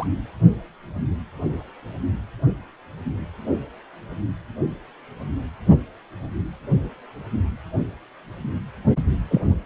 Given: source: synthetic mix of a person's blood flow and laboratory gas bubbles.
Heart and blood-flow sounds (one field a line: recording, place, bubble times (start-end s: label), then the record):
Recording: Doppler ultrasound of blood flow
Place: precordium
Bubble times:
0.00-0.06 s: bubbles
9.31-9.42 s: bubbles
From the record:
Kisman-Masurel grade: 123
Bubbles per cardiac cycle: 1 to 2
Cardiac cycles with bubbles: 10 to 50%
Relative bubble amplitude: loud (0.450 to 0.775)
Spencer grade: 2 (many but less than half of the cardiac periods contain bubble signals, singularly or in groups)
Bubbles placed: only in the low amplitude regions of the cardiac cycle